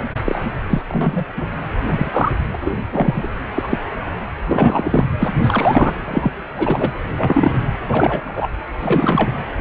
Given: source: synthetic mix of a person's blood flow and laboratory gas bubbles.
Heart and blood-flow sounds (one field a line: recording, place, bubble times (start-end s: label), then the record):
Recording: Doppler ultrasound of blood flow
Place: precordium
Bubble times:
0.26-0.41 s: bubbles
0.69-0.82 s: bubbles
0.88-1.25 s: bubbles
1.37-1.48 s: bubbles
1.87-2.10 s: bubbles
2.12-2.32 s: bubbles
2.53-2.55 s: bubbles
2.65-2.79 s: bubbles
2.92-3.28 s: bubbles
3.55-3.78 s: bubbles
4.47-5.04 s: bubbles
5.18-5.29 s: bubbles
5.43-5.92 s: bubbles
6.08-6.33 s: bubbles
6.58-6.92 s: bubbles
7.17-7.52 s: bubbles
7.88-8.22 s: bubbles
8.25-8.48 s: bubbles
8.80-9.32 s: bubbles
9.58-9.61 s: bubbles
From the record:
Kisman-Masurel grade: 243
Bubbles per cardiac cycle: several, 3 to 8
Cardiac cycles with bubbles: 100%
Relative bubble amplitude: loud (0.450 to 0.775)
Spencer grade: 3 (all of the cardiac periods contain showers or single bubble signals, but not dominating or overriding the cardiac motion signals)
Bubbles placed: anywhere in the cardiac cycle